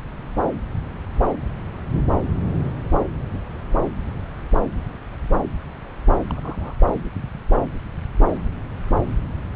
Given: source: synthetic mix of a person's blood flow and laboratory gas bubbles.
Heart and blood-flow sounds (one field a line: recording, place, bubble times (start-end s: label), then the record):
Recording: Doppler ultrasound of blood flow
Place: subclavian vein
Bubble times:
6.31-6.74 s: bubbles
From the record:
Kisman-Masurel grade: 111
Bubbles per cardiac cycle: 1 to 2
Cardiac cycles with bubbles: 1 to 10%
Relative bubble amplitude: barely perceptible (0.100 to 0.250)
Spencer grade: 1 (occasional bubble signal discernible with the cardiac motion signal, with majority of cardiac periods free of bubbles)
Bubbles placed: anywhere in the cardiac cycle